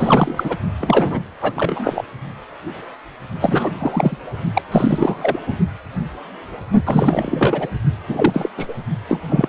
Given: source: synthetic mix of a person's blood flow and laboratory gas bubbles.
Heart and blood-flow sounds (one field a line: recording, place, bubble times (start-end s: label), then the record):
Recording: Doppler ultrasound of blood flow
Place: precordium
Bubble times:
0.00-0.57 s: bubbles
0.80-1.21 s: bubbles
1.41-2.04 s: bubbles
3.40-3.72 s: bubbles
3.78-4.17 s: bubbles
4.53-4.62 s: bubbles
4.71-5.39 s: bubbles
5.47-5.56 s: bubbles
6.85-7.68 s: bubbles
8.08-8.49 s: bubbles
8.57-8.74 s: bubbles
9.09-9.20 s: bubbles
9.29-9.49 s: bubbles
From the record:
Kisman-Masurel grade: 333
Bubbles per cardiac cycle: rolling drumbeat, 9 or more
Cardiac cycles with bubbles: 50 to 99%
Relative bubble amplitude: loud (0.450 to 0.775)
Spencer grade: 3 (all of the cardiac periods contain showers or single bubble signals, but not dominating or overriding the cardiac motion signals)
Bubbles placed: only in the low amplitude regions of the cardiac cycle